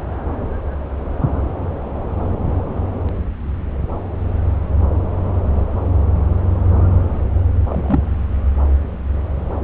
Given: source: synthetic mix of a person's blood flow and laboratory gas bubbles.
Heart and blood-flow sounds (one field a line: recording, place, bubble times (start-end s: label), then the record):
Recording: Doppler ultrasound of blood flow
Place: subclavian vein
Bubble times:
7.69-8.01 s: bubbles
From the record:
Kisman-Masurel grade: 112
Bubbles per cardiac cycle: 1 to 2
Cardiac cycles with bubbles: 1 to 10%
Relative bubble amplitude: moderate (0.250 to 0.450)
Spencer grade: 1 (occasional bubble signal discernible with the cardiac motion signal, with majority of cardiac periods free of bubbles)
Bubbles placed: anywhere in the cardiac cycle